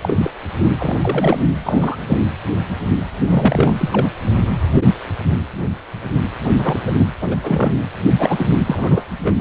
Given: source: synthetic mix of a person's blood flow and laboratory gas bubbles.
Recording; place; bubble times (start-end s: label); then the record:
Doppler ultrasound of blood flow; precordium
0.01-0.30 s: bubbles
0.77-0.97 s: bubbles
1.01-1.39 s: bubbles
1.63-1.98 s: bubbles
2.08-2.25 s: bubbles
3.28-3.75 s: bubbles
3.77-4.12 s: bubbles
6.58-6.80 s: bubbles
6.86-6.92 s: bubbles
6.98-7.08 s: bubbles
7.21-7.36 s: bubbles
7.42-7.78 s: bubbles
8.10-8.49 s: bubbles
8.67-9.03 s: bubbles
9.21-9.33 s: bubbles
From the record:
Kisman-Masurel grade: 232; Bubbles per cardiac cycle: several, 3 to 8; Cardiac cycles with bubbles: 50 to 99%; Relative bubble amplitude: moderate (0.250 to 0.450); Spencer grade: 3 (all of the cardiac periods contain showers or single bubble signals, but not dominating or overriding the cardiac motion signals); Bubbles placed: anywhere in the cardiac cycle